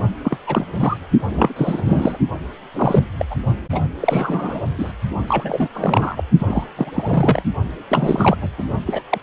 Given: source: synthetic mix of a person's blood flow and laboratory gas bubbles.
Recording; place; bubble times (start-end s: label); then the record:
Doppler ultrasound of blood flow; precordium
0.23-0.37 s: bubbles
0.47-0.66 s: bubbles
0.79-0.97 s: bubbles
1.31-2.18 s: bubbles
2.74-3.04 s: bubbles
3.18-3.25 s: bubbles
3.30-3.36 s: bubbles
3.72-3.81 s: bubbles
4.00-4.63 s: bubbles
4.78-4.92 s: bubbles
5.27-5.68 s: bubbles
5.75-6.24 s: bubbles
6.38-6.64 s: bubbles
6.76-6.91 s: bubbles
6.93-7.42 s: bubbles
7.90-8.37 s: bubbles
8.41-8.49 s: bubbles
8.58-8.63 s: bubbles
8.86-9.01 s: bubbles
9.10-9.18 s: bubbles
From the record:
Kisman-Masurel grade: 342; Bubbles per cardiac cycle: rolling drumbeat, 9 or more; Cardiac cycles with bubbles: 100%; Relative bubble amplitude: moderate (0.250 to 0.450); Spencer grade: 3 (all of the cardiac periods contain showers or single bubble signals, but not dominating or overriding the cardiac motion signals); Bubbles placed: only in the low amplitude regions of the cardiac cycle